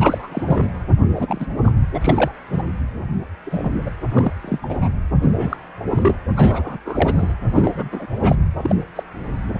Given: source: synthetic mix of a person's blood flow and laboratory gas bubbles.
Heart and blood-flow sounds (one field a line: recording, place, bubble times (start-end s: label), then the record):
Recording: Doppler ultrasound of blood flow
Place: precordium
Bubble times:
0.00-0.29 s: bubbles
0.31-0.65 s: bubbles
1.08-1.47 s: bubbles
1.64-1.72 s: bubbles
1.94-2.31 s: bubbles
2.50-2.62 s: bubbles
3.46-3.91 s: bubbles
4.12-4.33 s: bubbles
4.42-4.58 s: bubbles
4.62-4.88 s: bubbles
5.22-5.57 s: bubbles
5.91-6.14 s: bubbles
6.37-6.78 s: bubbles
6.84-7.33 s: bubbles
7.55-7.88 s: bubbles
7.92-8.06 s: bubbles
8.22-8.36 s: bubbles
8.58-8.76 s: bubbles
8.96-9.03 s: bubbles
From the record:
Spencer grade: 3 (all of the cardiac periods contain showers or single bubble signals, but not dominating or overriding the cardiac motion signals)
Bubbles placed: anywhere in the cardiac cycle